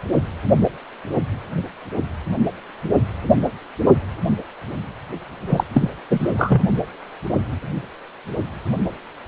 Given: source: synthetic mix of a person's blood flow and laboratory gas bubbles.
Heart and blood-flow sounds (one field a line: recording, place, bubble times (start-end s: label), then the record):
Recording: Doppler ultrasound of blood flow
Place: precordium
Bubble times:
5.46-5.64 s: bubbles
5.72-5.88 s: bubbles
6.10-6.31 s: bubbles
6.37-6.62 s: bubbles
From the record:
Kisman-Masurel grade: 213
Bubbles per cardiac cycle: several, 3 to 8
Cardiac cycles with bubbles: 1 to 10%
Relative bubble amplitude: loud (0.450 to 0.775)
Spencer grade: 1 (occasional bubble signal discernible with the cardiac motion signal, with majority of cardiac periods free of bubbles)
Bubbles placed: only in the low amplitude regions of the cardiac cycle